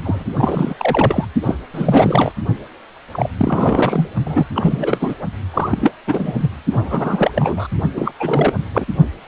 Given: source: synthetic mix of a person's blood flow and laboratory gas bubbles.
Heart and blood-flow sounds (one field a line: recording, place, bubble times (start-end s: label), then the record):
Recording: Doppler ultrasound of blood flow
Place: precordium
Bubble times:
0.03-0.29 s: bubbles
0.38-0.74 s: bubbles
0.78-1.25 s: bubbles
1.41-1.57 s: bubbles
1.71-2.32 s: bubbles
3.12-3.28 s: bubbles
3.37-4.08 s: bubbles
4.23-4.48 s: bubbles
4.54-5.16 s: bubbles
5.54-5.94 s: bubbles
6.07-6.50 s: bubbles
6.71-7.31 s: bubbles
7.35-7.67 s: bubbles
7.96-8.12 s: bubbles
8.20-8.53 s: bubbles
8.74-8.86 s: bubbles
From the record:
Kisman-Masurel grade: 343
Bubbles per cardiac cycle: rolling drumbeat, 9 or more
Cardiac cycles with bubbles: 100%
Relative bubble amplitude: loud (0.450 to 0.775)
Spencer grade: 3 (all of the cardiac periods contain showers or single bubble signals, but not dominating or overriding the cardiac motion signals)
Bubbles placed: only in the low amplitude regions of the cardiac cycle